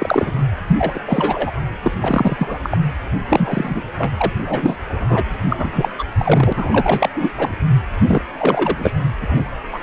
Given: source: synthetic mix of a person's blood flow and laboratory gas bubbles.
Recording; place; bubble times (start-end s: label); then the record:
Doppler ultrasound of blood flow; precordium
0.00-0.32 s: bubbles
0.67-1.00 s: bubbles
1.06-1.53 s: bubbles
1.82-1.92 s: bubbles
2.02-2.77 s: bubbles
3.28-3.81 s: bubbles
3.98-4.14 s: bubbles
4.17-4.32 s: bubbles
4.42-4.77 s: bubbles
4.87-5.23 s: bubbles
5.49-5.89 s: bubbles
5.98-6.05 s: bubbles
6.19-6.53 s: bubbles
6.55-7.09 s: bubbles
7.16-7.32 s: bubbles
7.37-7.55 s: bubbles
8.08-8.22 s: bubbles
8.38-8.76 s: bubbles
8.79-8.92 s: bubbles
9.21-9.48 s: bubbles
9.72-9.79 s: bubbles
From the record:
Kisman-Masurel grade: 343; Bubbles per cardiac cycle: rolling drumbeat, 9 or more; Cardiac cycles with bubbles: 100%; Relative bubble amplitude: loud (0.450 to 0.775); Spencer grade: 3 (all of the cardiac periods contain showers or single bubble signals, but not dominating or overriding the cardiac motion signals); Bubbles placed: anywhere in the cardiac cycle